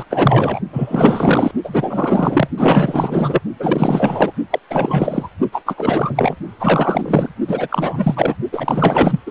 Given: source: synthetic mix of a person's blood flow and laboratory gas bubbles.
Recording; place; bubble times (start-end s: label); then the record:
Doppler ultrasound of blood flow; precordium
0.00-0.04 s: bubbles
0.09-0.60 s: bubbles
0.72-1.51 s: bubbles
1.64-2.48 s: bubbles
2.58-3.40 s: bubbles
3.59-4.33 s: bubbles
4.50-4.59 s: bubbles
4.70-5.29 s: bubbles
5.52-5.62 s: bubbles
5.66-6.36 s: bubbles
6.59-7.29 s: bubbles
7.48-8.36 s: bubbles
8.52-9.20 s: bubbles
9.26-9.31 s: bubbles
From the record:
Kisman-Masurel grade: 444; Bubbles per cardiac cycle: continuous sound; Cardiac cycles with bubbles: 100%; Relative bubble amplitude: maximal (0.775 to 0.999); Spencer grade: 4 (maximum detectable bubble signal sounding continuously throughout systole and diastole of every cardiac period, and overriding the amplitude of the normal cardiac signals); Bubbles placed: only in the low amplitude regions of the cardiac cycle